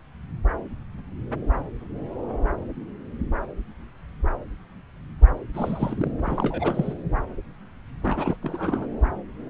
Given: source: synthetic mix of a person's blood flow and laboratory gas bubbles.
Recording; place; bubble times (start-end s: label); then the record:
Doppler ultrasound of blood flow; subclavian vein
5.54-6.12 s: bubbles
6.24-6.94 s: bubbles
8.01-8.37 s: bubbles
8.42-8.87 s: bubbles
From the record:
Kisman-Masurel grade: 221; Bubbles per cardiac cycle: several, 3 to 8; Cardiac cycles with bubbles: 10 to 50%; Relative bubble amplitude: barely perceptible (0.100 to 0.250); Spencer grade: 2 (many but less than half of the cardiac periods contain bubble signals, singularly or in groups); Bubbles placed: anywhere in the cardiac cycle